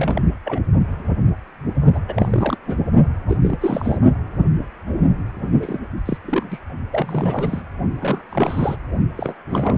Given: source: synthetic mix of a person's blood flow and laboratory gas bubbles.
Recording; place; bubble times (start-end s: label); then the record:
Doppler ultrasound of blood flow; precordium
0.00-0.25 s: bubbles
0.44-0.60 s: bubbles
1.95-1.99 s: bubbles
2.08-2.57 s: bubbles
2.67-2.78 s: bubbles
3.29-3.38 s: bubbles
3.42-3.57 s: bubbles
3.61-3.98 s: bubbles
5.61-5.79 s: bubbles
6.05-6.18 s: bubbles
6.24-6.44 s: bubbles
6.50-6.59 s: bubbles
6.92-7.62 s: bubbles
8.02-8.22 s: bubbles
8.29-8.77 s: bubbles
9.15-9.35 s: bubbles
9.49-9.78 s: bubbles
From the record:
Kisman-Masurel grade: 332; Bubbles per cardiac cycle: rolling drumbeat, 9 or more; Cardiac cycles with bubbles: 50 to 99%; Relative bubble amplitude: moderate (0.250 to 0.450); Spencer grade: 3 (all of the cardiac periods contain showers or single bubble signals, but not dominating or overriding the cardiac motion signals); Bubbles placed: only in the low amplitude regions of the cardiac cycle